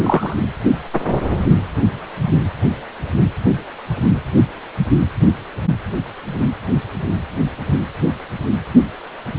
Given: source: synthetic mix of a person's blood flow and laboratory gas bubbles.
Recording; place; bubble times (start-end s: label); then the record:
Doppler ultrasound of blood flow; precordium
0.04-0.37 s: bubbles
From the record:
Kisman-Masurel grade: 113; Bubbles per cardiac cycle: 1 to 2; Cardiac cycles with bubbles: 1 to 10%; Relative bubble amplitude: loud (0.450 to 0.775); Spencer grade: 1 (occasional bubble signal discernible with the cardiac motion signal, with majority of cardiac periods free of bubbles); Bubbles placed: anywhere in the cardiac cycle